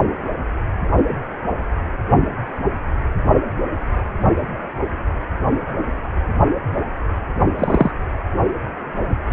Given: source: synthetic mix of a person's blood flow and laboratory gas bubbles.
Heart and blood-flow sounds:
Doppler ultrasound of blood flow; precordium
7.59-7.91 s: bubbles
From the record:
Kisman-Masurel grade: 123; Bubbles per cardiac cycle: 1 to 2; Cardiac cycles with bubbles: 10 to 50%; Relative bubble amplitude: loud (0.450 to 0.775); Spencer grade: 2 (many but less than half of the cardiac periods contain bubble signals, singularly or in groups); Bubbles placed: only in the low amplitude regions of the cardiac cycle

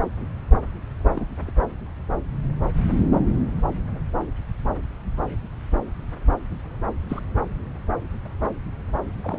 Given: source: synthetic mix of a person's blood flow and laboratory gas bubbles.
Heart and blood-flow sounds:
Doppler ultrasound of blood flow; subclavian vein
1.08-1.52 s: bubbles
7.09-7.21 s: bubbles
9.24-9.39 s: bubbles
From the record:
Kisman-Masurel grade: 121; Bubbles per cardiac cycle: 1 to 2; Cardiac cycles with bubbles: 10 to 50%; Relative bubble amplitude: barely perceptible (0.100 to 0.250); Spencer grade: 2 (many but less than half of the cardiac periods contain bubble signals, singularly or in groups); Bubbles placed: anywhere in the cardiac cycle

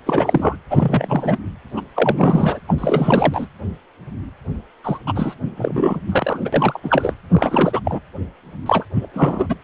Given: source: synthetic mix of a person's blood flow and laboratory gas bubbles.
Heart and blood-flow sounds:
Doppler ultrasound of blood flow; precordium
0.06-0.57 s: bubbles
0.70-1.38 s: bubbles
1.75-1.82 s: bubbles
1.96-2.60 s: bubbles
2.67-2.74 s: bubbles
2.78-3.46 s: bubbles
4.84-4.99 s: bubbles
5.07-5.34 s: bubbles
5.56-6.00 s: bubbles
6.07-6.39 s: bubbles
6.42-6.80 s: bubbles
6.83-7.13 s: bubbles
7.29-7.80 s: bubbles
7.84-7.99 s: bubbles
8.65-8.84 s: bubbles
8.93-9.07 s: bubbles
9.13-9.54 s: bubbles
From the record:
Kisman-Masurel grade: 333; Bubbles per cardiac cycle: rolling drumbeat, 9 or more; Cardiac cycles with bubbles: 50 to 99%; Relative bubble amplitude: loud (0.450 to 0.775); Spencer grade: 3 (all of the cardiac periods contain showers or single bubble signals, but not dominating or overriding the cardiac motion signals); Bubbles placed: anywhere in the cardiac cycle

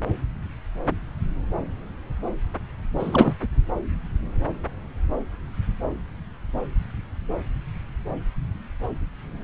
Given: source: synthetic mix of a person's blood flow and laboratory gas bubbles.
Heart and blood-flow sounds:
Doppler ultrasound of blood flow; subclavian vein
2.98-3.35 s: bubbles
3.42-3.46 s: bubbles
From the record:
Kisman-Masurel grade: 213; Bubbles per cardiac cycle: several, 3 to 8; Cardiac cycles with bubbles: 1 to 10%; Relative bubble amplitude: loud (0.450 to 0.775); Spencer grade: 1 (occasional bubble signal discernible with the cardiac motion signal, with majority of cardiac periods free of bubbles); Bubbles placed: anywhere in the cardiac cycle

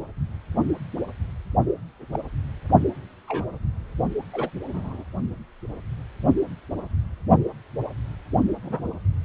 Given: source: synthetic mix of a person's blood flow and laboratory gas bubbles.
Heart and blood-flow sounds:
Doppler ultrasound of blood flow; precordium
2.14-2.19 s: bubbles
3.27-3.45 s: bubbles
4.33-4.49 s: bubbles
4.72-5.04 s: bubbles
8.63-8.87 s: bubbles
From the record:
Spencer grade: 2 (many but less than half of the cardiac periods contain bubble signals, singularly or in groups); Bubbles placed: only in the low amplitude regions of the cardiac cycle

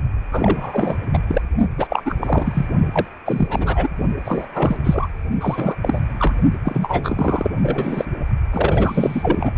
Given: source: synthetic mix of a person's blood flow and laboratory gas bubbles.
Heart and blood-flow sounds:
Doppler ultrasound of blood flow; precordium
0.31-0.97 s: bubbles
1.13-1.20 s: bubbles
1.28-1.42 s: bubbles
1.78-2.15 s: bubbles
2.20-2.66 s: bubbles
2.92-3.05 s: bubbles
3.25-3.89 s: bubbles
4.25-4.46 s: bubbles
4.54-4.76 s: bubbles
4.83-5.08 s: bubbles
5.40-5.75 s: bubbles
5.82-6.00 s: bubbles
6.18-6.35 s: bubbles
6.64-7.51 s: bubbles
7.62-8.05 s: bubbles
8.53-9.51 s: bubbles
From the record:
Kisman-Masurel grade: 343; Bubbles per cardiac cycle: rolling drumbeat, 9 or more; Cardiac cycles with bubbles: 100%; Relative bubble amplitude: loud (0.450 to 0.775); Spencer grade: 3 (all of the cardiac periods contain showers or single bubble signals, but not dominating or overriding the cardiac motion signals); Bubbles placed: only in the low amplitude regions of the cardiac cycle

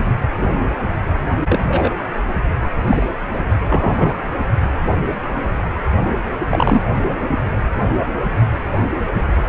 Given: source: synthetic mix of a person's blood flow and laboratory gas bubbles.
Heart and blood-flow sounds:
Doppler ultrasound of blood flow; precordium
1.49-1.90 s: bubbles
2.84-3.06 s: bubbles
3.69-4.13 s: bubbles
6.47-6.82 s: bubbles
From the record:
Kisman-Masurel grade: 123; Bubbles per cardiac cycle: 1 to 2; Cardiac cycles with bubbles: 10 to 50%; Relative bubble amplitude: loud (0.450 to 0.775); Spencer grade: 2 (many but less than half of the cardiac periods contain bubble signals, singularly or in groups); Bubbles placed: anywhere in the cardiac cycle

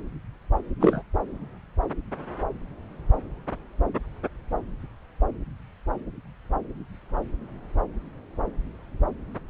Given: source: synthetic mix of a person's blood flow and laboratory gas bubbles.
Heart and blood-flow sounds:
Doppler ultrasound of blood flow; subclavian vein
0.80-1.02 s: bubbles
From the record:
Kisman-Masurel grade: 113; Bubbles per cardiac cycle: 1 to 2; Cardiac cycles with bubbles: 1 to 10%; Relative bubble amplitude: loud (0.450 to 0.775); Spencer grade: 1 (occasional bubble signal discernible with the cardiac motion signal, with majority of cardiac periods free of bubbles); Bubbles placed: anywhere in the cardiac cycle

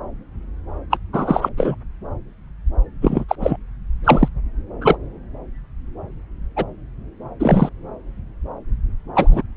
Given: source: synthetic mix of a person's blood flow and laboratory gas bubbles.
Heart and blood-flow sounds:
Doppler ultrasound of blood flow; subclavian vein
0.90-0.97 s: bubbles
1.12-1.49 s: bubbles
1.57-1.75 s: bubbles
3.02-3.24 s: bubbles
3.29-3.35 s: bubbles
3.40-3.56 s: bubbles
4.04-4.29 s: bubbles
4.81-4.98 s: bubbles
6.56-6.65 s: bubbles
7.40-7.69 s: bubbles
9.15-9.42 s: bubbles
From the record:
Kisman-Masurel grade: 233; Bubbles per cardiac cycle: several, 3 to 8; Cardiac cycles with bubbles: 50 to 99%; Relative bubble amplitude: loud (0.450 to 0.775); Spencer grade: 3 (all of the cardiac periods contain showers or single bubble signals, but not dominating or overriding the cardiac motion signals); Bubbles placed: anywhere in the cardiac cycle

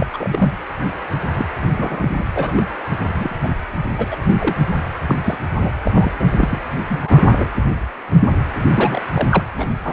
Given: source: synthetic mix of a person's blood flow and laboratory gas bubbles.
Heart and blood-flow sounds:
Doppler ultrasound of blood flow; precordium
0.00-0.07 s: bubbles
0.12-0.53 s: bubbles
1.35-1.46 s: bubbles
1.50-2.26 s: bubbles
2.35-2.63 s: bubbles
3.03-3.48 s: bubbles
3.96-4.16 s: bubbles
4.23-4.33 s: bubbles
4.38-4.53 s: bubbles
5.08-5.17 s: bubbles
5.24-5.38 s: bubbles
5.58-5.72 s: bubbles
5.85-6.12 s: bubbles
6.20-6.31 s: bubbles
6.38-6.62 s: bubbles
6.89-7.46 s: bubbles
8.54-9.02 s: bubbles
9.13-9.28 s: bubbles
9.31-9.43 s: bubbles
9.57-9.69 s: bubbles
9.83-9.93 s: bubbles
From the record:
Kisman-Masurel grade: 232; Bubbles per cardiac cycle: several, 3 to 8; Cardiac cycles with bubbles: 50 to 99%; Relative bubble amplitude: moderate (0.250 to 0.450); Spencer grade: 3 (all of the cardiac periods contain showers or single bubble signals, but not dominating or overriding the cardiac motion signals); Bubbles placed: anywhere in the cardiac cycle

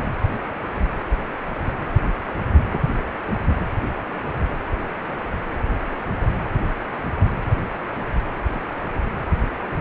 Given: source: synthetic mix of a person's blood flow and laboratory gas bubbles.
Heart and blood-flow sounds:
Doppler ultrasound of blood flow; precordium
2.73-2.79 s: bubbles
From the record:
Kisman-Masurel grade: 113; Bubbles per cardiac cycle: 1 to 2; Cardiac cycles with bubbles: 1 to 10%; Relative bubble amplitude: loud (0.450 to 0.775); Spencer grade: 1 (occasional bubble signal discernible with the cardiac motion signal, with majority of cardiac periods free of bubbles); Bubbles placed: anywhere in the cardiac cycle

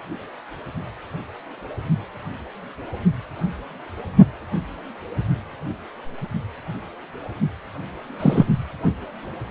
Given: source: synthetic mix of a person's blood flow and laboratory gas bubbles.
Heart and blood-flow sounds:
Doppler ultrasound of blood flow; precordium
8.20-8.46 s: bubbles
From the record:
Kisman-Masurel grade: 123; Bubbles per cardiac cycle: 1 to 2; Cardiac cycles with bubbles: 10 to 50%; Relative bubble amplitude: loud (0.450 to 0.775); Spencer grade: 2 (many but less than half of the cardiac periods contain bubble signals, singularly or in groups); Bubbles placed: anywhere in the cardiac cycle

